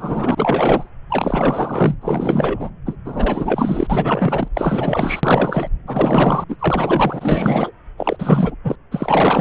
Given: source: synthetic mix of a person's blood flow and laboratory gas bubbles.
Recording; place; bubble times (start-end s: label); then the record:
Doppler ultrasound of blood flow; subclavian vein
0.00-0.90 s: bubbles
1.09-1.95 s: bubbles
2.02-2.70 s: bubbles
2.85-2.96 s: bubbles
3.04-3.87 s: bubbles
3.90-4.48 s: bubbles
4.54-5.68 s: bubbles
5.87-6.44 s: bubbles
6.48-6.57 s: bubbles
6.59-7.72 s: bubbles
7.97-8.16 s: bubbles
8.19-8.55 s: bubbles
8.64-8.75 s: bubbles
8.91-9.41 s: bubbles
From the record:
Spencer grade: 4 (maximum detectable bubble signal sounding continuously throughout systole and diastole of every cardiac period, and overriding the amplitude of the normal cardiac signals); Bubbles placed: anywhere in the cardiac cycle